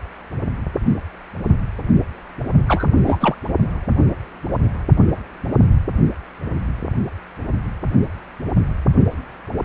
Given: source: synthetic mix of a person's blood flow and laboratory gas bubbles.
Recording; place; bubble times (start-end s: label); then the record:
Doppler ultrasound of blood flow; precordium
2.67-2.90 s: bubbles
3.06-3.36 s: bubbles
From the record:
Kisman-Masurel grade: 212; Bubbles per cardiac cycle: several, 3 to 8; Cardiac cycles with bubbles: 1 to 10%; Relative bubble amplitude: moderate (0.250 to 0.450); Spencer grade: 1 (occasional bubble signal discernible with the cardiac motion signal, with majority of cardiac periods free of bubbles); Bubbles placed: only in the low amplitude regions of the cardiac cycle